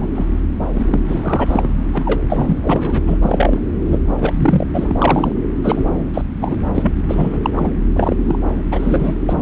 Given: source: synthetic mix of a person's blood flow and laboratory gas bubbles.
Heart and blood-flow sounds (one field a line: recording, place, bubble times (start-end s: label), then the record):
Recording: Doppler ultrasound of blood flow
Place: subclavian vein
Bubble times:
0.00-0.09 s: bubbles
0.15-0.26 s: bubbles
0.73-1.01 s: bubbles
1.07-1.69 s: bubbles
1.93-2.23 s: bubbles
2.29-2.59 s: bubbles
2.62-3.02 s: bubbles
3.06-3.17 s: bubbles
3.23-3.61 s: bubbles
3.85-3.99 s: bubbles
4.21-4.33 s: bubbles
4.36-4.67 s: bubbles
4.73-5.32 s: bubbles
5.63-5.83 s: bubbles
6.13-6.21 s: bubbles
6.38-6.67 s: bubbles
6.75-6.92 s: bubbles
7.09-7.38 s: bubbles
7.43-7.50 s: bubbles
7.57-7.71 s: bubbles
7.96-8.17 s: bubbles
8.28-8.39 s: bubbles
8.71-9.16 s: bubbles
9.29-9.42 s: bubbles
From the record:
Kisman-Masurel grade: 343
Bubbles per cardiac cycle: rolling drumbeat, 9 or more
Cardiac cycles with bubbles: 100%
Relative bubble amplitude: loud (0.450 to 0.775)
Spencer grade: 3 (all of the cardiac periods contain showers or single bubble signals, but not dominating or overriding the cardiac motion signals)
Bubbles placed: anywhere in the cardiac cycle